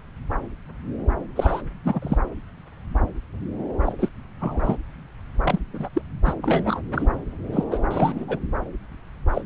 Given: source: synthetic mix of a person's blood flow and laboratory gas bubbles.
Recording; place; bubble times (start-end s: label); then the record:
Doppler ultrasound of blood flow; subclavian vein
1.35-1.62 s: bubbles
1.84-2.17 s: bubbles
3.81-3.92 s: bubbles
3.99-4.08 s: bubbles
4.39-4.76 s: bubbles
5.43-5.59 s: bubbles
5.73-5.89 s: bubbles
5.93-6.01 s: bubbles
6.25-6.34 s: bubbles
6.42-6.82 s: bubbles
6.94-7.08 s: bubbles
7.52-7.63 s: bubbles
7.71-7.79 s: bubbles
7.91-8.25 s: bubbles
8.28-8.39 s: bubbles
9.31-9.42 s: bubbles
From the record:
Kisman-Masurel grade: 232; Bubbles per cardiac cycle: several, 3 to 8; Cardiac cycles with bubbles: 50 to 99%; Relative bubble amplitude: moderate (0.250 to 0.450); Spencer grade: 3 (all of the cardiac periods contain showers or single bubble signals, but not dominating or overriding the cardiac motion signals); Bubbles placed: anywhere in the cardiac cycle